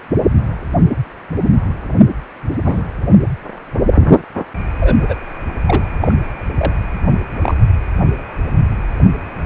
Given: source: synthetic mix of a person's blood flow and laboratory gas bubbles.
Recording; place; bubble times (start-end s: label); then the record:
Doppler ultrasound of blood flow; precordium
2.65-2.83 s: bubbles
4.80-5.15 s: bubbles
5.65-5.84 s: bubbles
6.00-6.14 s: bubbles
6.57-6.73 s: bubbles
7.42-7.55 s: bubbles
From the record:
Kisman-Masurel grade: 122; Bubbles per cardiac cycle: 1 to 2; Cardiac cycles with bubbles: 10 to 50%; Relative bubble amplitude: moderate (0.250 to 0.450); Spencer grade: 2 (many but less than half of the cardiac periods contain bubble signals, singularly or in groups); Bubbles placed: anywhere in the cardiac cycle